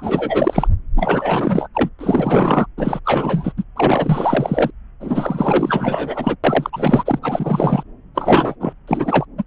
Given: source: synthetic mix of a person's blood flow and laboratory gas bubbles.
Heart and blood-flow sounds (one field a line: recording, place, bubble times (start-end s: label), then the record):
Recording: Doppler ultrasound of blood flow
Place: subclavian vein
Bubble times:
0.00-0.68 s: bubbles
0.96-1.68 s: bubbles
1.74-1.89 s: bubbles
1.99-2.67 s: bubbles
2.77-3.00 s: bubbles
3.04-3.53 s: bubbles
3.57-3.64 s: bubbles
3.76-4.71 s: bubbles
5.00-6.36 s: bubbles
6.43-7.19 s: bubbles
7.22-7.83 s: bubbles
8.14-8.55 s: bubbles
8.60-8.73 s: bubbles
8.87-9.25 s: bubbles
9.38-9.44 s: bubbles
From the record:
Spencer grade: 4 (maximum detectable bubble signal sounding continuously throughout systole and diastole of every cardiac period, and overriding the amplitude of the normal cardiac signals)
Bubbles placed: anywhere in the cardiac cycle